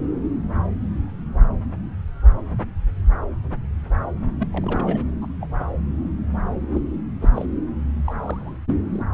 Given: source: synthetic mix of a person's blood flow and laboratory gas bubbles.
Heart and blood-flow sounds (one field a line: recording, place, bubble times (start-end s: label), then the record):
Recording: Doppler ultrasound of blood flow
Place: subclavian vein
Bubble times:
4.39-4.46 s: bubbles
4.52-5.05 s: bubbles
5.21-5.27 s: bubbles
5.40-5.47 s: bubbles
5.59-5.66 s: bubbles
6.73-6.81 s: bubbles
7.21-7.29 s: bubbles
7.35-7.46 s: bubbles
8.05-8.56 s: bubbles
8.92-9.05 s: bubbles
From the record:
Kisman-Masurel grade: 221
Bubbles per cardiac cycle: several, 3 to 8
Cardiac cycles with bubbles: 10 to 50%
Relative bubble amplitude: barely perceptible (0.100 to 0.250)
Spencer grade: 2 (many but less than half of the cardiac periods contain bubble signals, singularly or in groups)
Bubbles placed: anywhere in the cardiac cycle